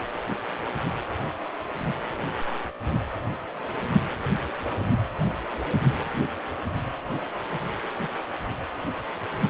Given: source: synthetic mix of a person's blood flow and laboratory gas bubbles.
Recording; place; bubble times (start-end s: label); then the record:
Doppler ultrasound of blood flow; precordium
no bubbles
From the record:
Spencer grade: 0 (complete lack of bubble signals)